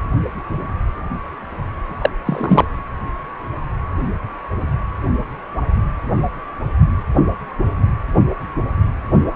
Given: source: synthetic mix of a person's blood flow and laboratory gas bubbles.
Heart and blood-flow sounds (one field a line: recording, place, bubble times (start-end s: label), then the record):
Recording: Doppler ultrasound of blood flow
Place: precordium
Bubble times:
2.01-2.09 s: bubbles
2.25-2.65 s: bubbles
From the record:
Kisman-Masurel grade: 113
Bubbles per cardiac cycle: 1 to 2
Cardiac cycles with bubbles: 1 to 10%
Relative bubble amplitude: loud (0.450 to 0.775)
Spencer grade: 1 (occasional bubble signal discernible with the cardiac motion signal, with majority of cardiac periods free of bubbles)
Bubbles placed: anywhere in the cardiac cycle